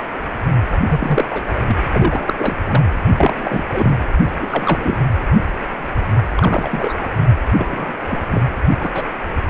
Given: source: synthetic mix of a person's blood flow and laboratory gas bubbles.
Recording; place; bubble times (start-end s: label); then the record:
Doppler ultrasound of blood flow; precordium
0.71-0.80 s: bubbles
0.88-1.25 s: bubbles
1.30-1.44 s: bubbles
1.55-1.60 s: bubbles
1.68-1.76 s: bubbles
1.93-2.33 s: bubbles
2.38-2.56 s: bubbles
2.64-2.82 s: bubbles
3.12-3.64 s: bubbles
3.73-3.98 s: bubbles
4.39-4.97 s: bubbles
6.37-7.07 s: bubbles
7.52-7.95 s: bubbles
8.08-8.26 s: bubbles
8.31-8.41 s: bubbles
8.79-8.90 s: bubbles
8.95-9.03 s: bubbles
From the record:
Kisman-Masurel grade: 232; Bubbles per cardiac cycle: several, 3 to 8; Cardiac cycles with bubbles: 50 to 99%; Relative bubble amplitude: moderate (0.250 to 0.450); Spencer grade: 3 (all of the cardiac periods contain showers or single bubble signals, but not dominating or overriding the cardiac motion signals); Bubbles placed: anywhere in the cardiac cycle